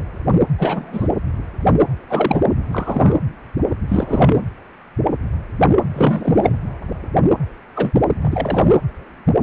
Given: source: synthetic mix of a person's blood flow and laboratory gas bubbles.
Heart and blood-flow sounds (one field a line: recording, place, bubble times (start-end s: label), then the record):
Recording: Doppler ultrasound of blood flow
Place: precordium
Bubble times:
0.58-1.08 s: bubbles
2.10-2.40 s: bubbles
2.71-3.18 s: bubbles
3.88-4.45 s: bubbles
5.93-6.55 s: bubbles
7.75-7.91 s: bubbles
7.94-8.02 s: bubbles
8.21-8.75 s: bubbles
From the record:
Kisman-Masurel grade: 233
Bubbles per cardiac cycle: several, 3 to 8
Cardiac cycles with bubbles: 50 to 99%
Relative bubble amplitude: loud (0.450 to 0.775)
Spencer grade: 3 (all of the cardiac periods contain showers or single bubble signals, but not dominating or overriding the cardiac motion signals)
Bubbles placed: anywhere in the cardiac cycle